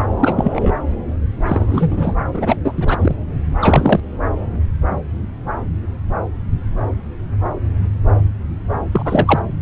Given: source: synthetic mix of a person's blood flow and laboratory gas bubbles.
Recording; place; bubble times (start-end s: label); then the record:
Doppler ultrasound of blood flow; subclavian vein
0.19-0.72 s: bubbles
1.47-2.17 s: bubbles
2.34-2.56 s: bubbles
2.64-2.73 s: bubbles
2.77-3.16 s: bubbles
3.60-4.00 s: bubbles
8.92-9.39 s: bubbles
From the record:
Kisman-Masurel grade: 223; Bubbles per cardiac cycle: several, 3 to 8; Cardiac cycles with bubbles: 10 to 50%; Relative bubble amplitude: loud (0.450 to 0.775); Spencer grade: 2 (many but less than half of the cardiac periods contain bubble signals, singularly or in groups); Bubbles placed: anywhere in the cardiac cycle